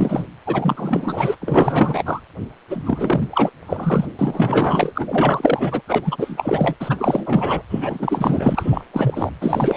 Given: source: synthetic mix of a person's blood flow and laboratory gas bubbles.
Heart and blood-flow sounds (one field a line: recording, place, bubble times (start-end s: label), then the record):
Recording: Doppler ultrasound of blood flow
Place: precordium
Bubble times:
0.00-0.27 s: bubbles
0.46-1.35 s: bubbles
1.41-2.20 s: bubbles
2.69-3.28 s: bubbles
3.31-3.50 s: bubbles
3.65-4.05 s: bubbles
4.19-5.81 s: bubbles
5.87-6.75 s: bubbles
6.79-7.62 s: bubbles
7.69-8.85 s: bubbles
8.93-9.31 s: bubbles
9.41-9.77 s: bubbles
From the record:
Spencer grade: 4 (maximum detectable bubble signal sounding continuously throughout systole and diastole of every cardiac period, and overriding the amplitude of the normal cardiac signals)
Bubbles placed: anywhere in the cardiac cycle